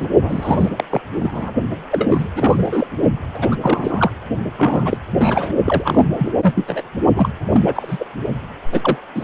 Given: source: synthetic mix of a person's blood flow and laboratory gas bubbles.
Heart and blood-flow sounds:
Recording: Doppler ultrasound of blood flow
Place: precordium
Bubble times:
0.00-0.08 s: bubbles
0.21-0.70 s: bubbles
0.76-0.84 s: bubbles
0.89-1.02 s: bubbles
1.15-1.53 s: bubbles
1.90-2.28 s: bubbles
2.35-2.87 s: bubbles
3.34-3.58 s: bubbles
3.61-4.11 s: bubbles
4.57-4.98 s: bubbles
5.17-5.54 s: bubbles
5.66-6.09 s: bubbles
6.16-6.32 s: bubbles
6.41-6.82 s: bubbles
7.15-7.33 s: bubbles
7.52-8.06 s: bubbles
8.71-8.97 s: bubbles
9.15-9.24 s: bubbles
From the record:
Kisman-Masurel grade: 343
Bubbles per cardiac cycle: rolling drumbeat, 9 or more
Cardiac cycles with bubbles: 100%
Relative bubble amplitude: loud (0.450 to 0.775)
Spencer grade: 3 (all of the cardiac periods contain showers or single bubble signals, but not dominating or overriding the cardiac motion signals)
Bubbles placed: only in the low amplitude regions of the cardiac cycle

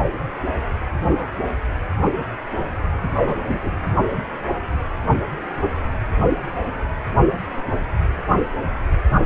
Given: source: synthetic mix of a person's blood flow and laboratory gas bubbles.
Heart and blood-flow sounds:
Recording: Doppler ultrasound of blood flow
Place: precordium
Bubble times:
3.21-3.70 s: bubbles
From the record:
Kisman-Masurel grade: 112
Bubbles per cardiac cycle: 1 to 2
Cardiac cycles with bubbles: 1 to 10%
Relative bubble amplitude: moderate (0.250 to 0.450)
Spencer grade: 1 (occasional bubble signal discernible with the cardiac motion signal, with majority of cardiac periods free of bubbles)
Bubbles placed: only in the low amplitude regions of the cardiac cycle

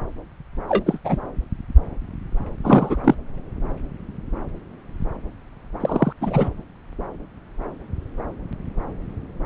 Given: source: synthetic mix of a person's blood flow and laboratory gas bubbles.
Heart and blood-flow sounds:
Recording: Doppler ultrasound of blood flow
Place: subclavian vein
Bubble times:
0.69-0.99 s: bubbles
1.04-1.19 s: bubbles
2.63-2.96 s: bubbles
3.04-3.15 s: bubbles
5.80-6.12 s: bubbles
6.21-6.49 s: bubbles
From the record:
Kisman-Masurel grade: 223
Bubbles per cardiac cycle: several, 3 to 8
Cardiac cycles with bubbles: 10 to 50%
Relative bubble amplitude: loud (0.450 to 0.775)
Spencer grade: 2 (many but less than half of the cardiac periods contain bubble signals, singularly or in groups)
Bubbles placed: anywhere in the cardiac cycle

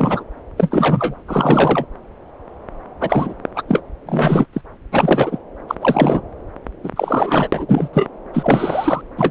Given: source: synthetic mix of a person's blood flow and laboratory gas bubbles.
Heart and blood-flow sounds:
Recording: Doppler ultrasound of blood flow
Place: subclavian vein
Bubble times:
0.00-0.24 s: bubbles
0.57-1.16 s: bubbles
1.27-1.86 s: bubbles
3.00-3.34 s: bubbles
3.55-3.63 s: bubbles
3.68-3.82 s: bubbles
4.06-4.46 s: bubbles
4.52-4.61 s: bubbles
4.92-5.39 s: bubbles
5.67-5.75 s: bubbles
5.81-6.21 s: bubbles
6.83-6.90 s: bubbles
6.96-7.48 s: bubbles
7.52-7.89 s: bubbles
7.93-8.10 s: bubbles
8.33-9.02 s: bubbles
9.17-9.31 s: bubbles
From the record:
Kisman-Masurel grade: 333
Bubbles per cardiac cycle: rolling drumbeat, 9 or more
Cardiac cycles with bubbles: 50 to 99%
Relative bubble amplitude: loud (0.450 to 0.775)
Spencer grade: 3 (all of the cardiac periods contain showers or single bubble signals, but not dominating or overriding the cardiac motion signals)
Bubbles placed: anywhere in the cardiac cycle

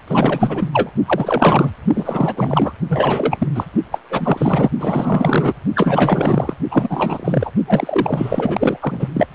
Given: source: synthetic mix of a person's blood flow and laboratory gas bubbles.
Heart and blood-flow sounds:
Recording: Doppler ultrasound of blood flow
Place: precordium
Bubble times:
0.08-0.91 s: bubbles
1.05-1.71 s: bubbles
1.94-2.73 s: bubbles
2.89-3.48 s: bubbles
3.55-3.66 s: bubbles
3.92-3.99 s: bubbles
4.10-4.71 s: bubbles
4.79-5.54 s: bubbles
5.75-6.54 s: bubbles
6.71-7.52 s: bubbles
7.67-8.77 s: bubbles
8.81-9.08 s: bubbles
9.13-9.27 s: bubbles
From the record:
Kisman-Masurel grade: 444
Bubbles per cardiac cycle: continuous sound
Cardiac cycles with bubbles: 100%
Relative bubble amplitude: maximal (0.775 to 0.999)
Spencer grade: 4 (maximum detectable bubble signal sounding continuously throughout systole and diastole of every cardiac period, and overriding the amplitude of the normal cardiac signals)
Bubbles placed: only in the low amplitude regions of the cardiac cycle

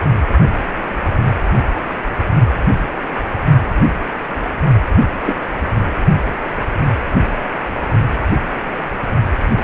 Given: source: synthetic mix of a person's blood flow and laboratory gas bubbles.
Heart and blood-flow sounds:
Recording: Doppler ultrasound of blood flow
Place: precordium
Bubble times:
5.22-5.33 s: bubbles
9.55-9.64 s: bubbles
From the record:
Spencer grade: 2 (many but less than half of the cardiac periods contain bubble signals, singularly or in groups)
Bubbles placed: only in the low amplitude regions of the cardiac cycle

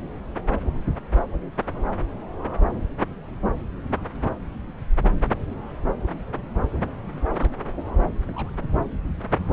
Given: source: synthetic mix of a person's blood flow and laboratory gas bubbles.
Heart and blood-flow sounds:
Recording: Doppler ultrasound of blood flow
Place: subclavian vein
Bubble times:
1.73-2.02 s: bubbles
7.14-7.52 s: bubbles
8.26-8.30 s: bubbles
8.34-8.50 s: bubbles
From the record:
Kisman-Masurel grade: 121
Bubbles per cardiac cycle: 1 to 2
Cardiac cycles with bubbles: 10 to 50%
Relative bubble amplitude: barely perceptible (0.100 to 0.250)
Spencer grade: 2 (many but less than half of the cardiac periods contain bubble signals, singularly or in groups)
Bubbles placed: anywhere in the cardiac cycle

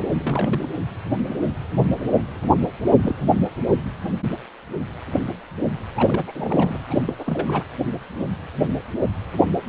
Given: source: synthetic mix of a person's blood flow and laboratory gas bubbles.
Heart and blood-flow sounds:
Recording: Doppler ultrasound of blood flow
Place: precordium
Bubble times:
0.18-0.67 s: bubbles
3.02-3.15 s: bubbles
5.95-6.24 s: bubbles
6.28-6.79 s: bubbles
6.90-7.14 s: bubbles
7.18-7.63 s: bubbles
From the record:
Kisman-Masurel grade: 222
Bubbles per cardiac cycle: several, 3 to 8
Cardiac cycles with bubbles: 10 to 50%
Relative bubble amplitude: moderate (0.250 to 0.450)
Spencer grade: 2 (many but less than half of the cardiac periods contain bubble signals, singularly or in groups)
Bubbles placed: anywhere in the cardiac cycle

